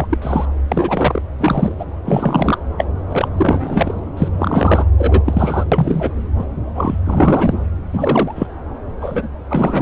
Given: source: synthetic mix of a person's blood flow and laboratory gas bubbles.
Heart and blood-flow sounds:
Doppler ultrasound of blood flow; subclavian vein
0.00-0.06 s: bubbles
0.09-0.17 s: bubbles
0.22-0.46 s: bubbles
0.68-1.22 s: bubbles
1.40-1.74 s: bubbles
1.79-1.85 s: bubbles
2.04-2.58 s: bubbles
2.77-2.85 s: bubbles
3.10-3.28 s: bubbles
3.37-4.00 s: bubbles
4.17-4.29 s: bubbles
4.33-4.86 s: bubbles
4.98-6.21 s: bubbles
6.38-6.45 s: bubbles
6.75-6.98 s: bubbles
7.04-7.59 s: bubbles
7.92-8.47 s: bubbles
9.01-9.28 s: bubbles
9.49-9.81 s: bubbles
From the record:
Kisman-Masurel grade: 243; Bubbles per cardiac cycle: several, 3 to 8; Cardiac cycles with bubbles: 100%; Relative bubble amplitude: loud (0.450 to 0.775); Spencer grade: 3 (all of the cardiac periods contain showers or single bubble signals, but not dominating or overriding the cardiac motion signals); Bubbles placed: anywhere in the cardiac cycle

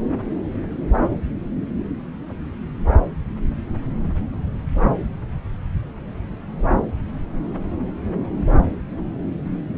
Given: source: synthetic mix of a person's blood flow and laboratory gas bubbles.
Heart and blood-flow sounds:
Doppler ultrasound of blood flow; subclavian vein
no bubbles
From the record:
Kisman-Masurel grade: 000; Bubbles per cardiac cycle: 0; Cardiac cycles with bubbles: 0%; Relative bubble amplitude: no bubbles discernible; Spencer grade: 0 (complete lack of bubble signals)

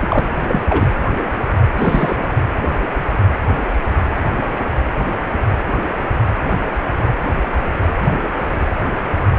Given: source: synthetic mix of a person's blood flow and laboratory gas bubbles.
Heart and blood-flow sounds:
Doppler ultrasound of blood flow; precordium
0.00-0.07 s: bubbles
0.09-0.29 s: bubbles
0.47-0.61 s: bubbles
0.68-0.88 s: bubbles
1.76-2.28 s: bubbles
From the record:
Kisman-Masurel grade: 223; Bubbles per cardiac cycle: several, 3 to 8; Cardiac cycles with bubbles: 10 to 50%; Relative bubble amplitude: loud (0.450 to 0.775); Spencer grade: 2 (many but less than half of the cardiac periods contain bubble signals, singularly or in groups); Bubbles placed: anywhere in the cardiac cycle

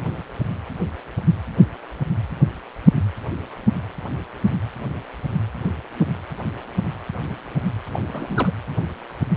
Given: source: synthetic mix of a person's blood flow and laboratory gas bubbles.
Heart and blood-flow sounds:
Doppler ultrasound of blood flow; precordium
7.91-7.99 s: bubbles
8.13-8.51 s: bubbles
From the record:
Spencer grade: 1 (occasional bubble signal discernible with the cardiac motion signal, with majority of cardiac periods free of bubbles); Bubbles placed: anywhere in the cardiac cycle

